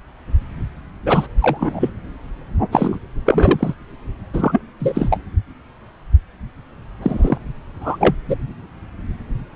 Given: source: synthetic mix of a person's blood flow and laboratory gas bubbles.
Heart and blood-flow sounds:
Doppler ultrasound of blood flow; subclavian vein
1.06-1.27 s: bubbles
1.42-1.90 s: bubbles
2.71-2.98 s: bubbles
3.25-3.74 s: bubbles
4.33-4.61 s: bubbles
4.80-5.18 s: bubbles
7.02-7.38 s: bubbles
7.80-8.15 s: bubbles
8.28-8.36 s: bubbles
From the record:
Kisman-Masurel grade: 223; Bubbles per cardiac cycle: several, 3 to 8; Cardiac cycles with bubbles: 10 to 50%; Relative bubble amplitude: loud (0.450 to 0.775); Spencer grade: 2 (many but less than half of the cardiac periods contain bubble signals, singularly or in groups); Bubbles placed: anywhere in the cardiac cycle

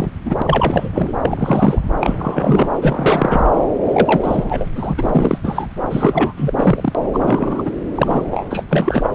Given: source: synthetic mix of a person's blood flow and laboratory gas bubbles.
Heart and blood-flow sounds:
Doppler ultrasound of blood flow; subclavian vein
0.00-0.09 s: bubbles
0.25-0.35 s: bubbles
0.38-1.13 s: bubbles
1.24-1.80 s: bubbles
1.99-2.67 s: bubbles
2.81-3.48 s: bubbles
3.88-4.45 s: bubbles
4.49-4.67 s: bubbles
4.75-4.94 s: bubbles
4.98-5.38 s: bubbles
5.43-5.67 s: bubbles
5.90-6.33 s: bubbles
6.37-6.53 s: bubbles
6.57-6.92 s: bubbles
7.13-7.71 s: bubbles
7.95-8.27 s: bubbles
8.31-8.46 s: bubbles
8.51-8.64 s: bubbles
8.70-9.11 s: bubbles
From the record:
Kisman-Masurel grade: 343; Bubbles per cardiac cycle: rolling drumbeat, 9 or more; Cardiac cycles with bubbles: 100%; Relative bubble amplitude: loud (0.450 to 0.775); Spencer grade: 3 (all of the cardiac periods contain showers or single bubble signals, but not dominating or overriding the cardiac motion signals); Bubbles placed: anywhere in the cardiac cycle

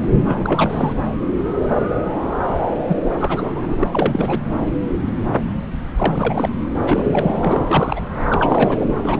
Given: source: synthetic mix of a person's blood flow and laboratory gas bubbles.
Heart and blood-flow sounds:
Doppler ultrasound of blood flow; subclavian vein
0.00-0.11 s: bubbles
0.21-0.93 s: bubbles
2.88-3.00 s: bubbles
3.04-3.76 s: bubbles
3.79-4.39 s: bubbles
5.97-6.50 s: bubbles
6.80-7.61 s: bubbles
7.67-8.00 s: bubbles
8.30-8.85 s: bubbles
8.88-8.94 s: bubbles
9.04-9.20 s: bubbles
From the record:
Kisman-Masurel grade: 332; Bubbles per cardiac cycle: rolling drumbeat, 9 or more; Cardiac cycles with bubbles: 50 to 99%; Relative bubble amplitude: moderate (0.250 to 0.450); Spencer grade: 3 (all of the cardiac periods contain showers or single bubble signals, but not dominating or overriding the cardiac motion signals); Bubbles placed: anywhere in the cardiac cycle

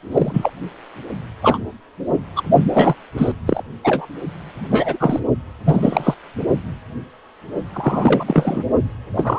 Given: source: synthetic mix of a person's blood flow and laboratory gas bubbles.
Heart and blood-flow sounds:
Doppler ultrasound of blood flow; precordium
0.11-0.50 s: bubbles
1.42-1.57 s: bubbles
2.35-2.42 s: bubbles
2.73-2.96 s: bubbles
3.17-3.32 s: bubbles
3.46-3.62 s: bubbles
3.83-4.06 s: bubbles
4.70-5.20 s: bubbles
5.66-6.14 s: bubbles
7.74-8.24 s: bubbles
8.27-8.63 s: bubbles
9.15-9.38 s: bubbles
From the record:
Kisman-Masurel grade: 233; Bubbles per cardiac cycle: several, 3 to 8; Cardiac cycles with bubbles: 50 to 99%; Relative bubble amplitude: loud (0.450 to 0.775); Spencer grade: 3 (all of the cardiac periods contain showers or single bubble signals, but not dominating or overriding the cardiac motion signals); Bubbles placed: only in the low amplitude regions of the cardiac cycle

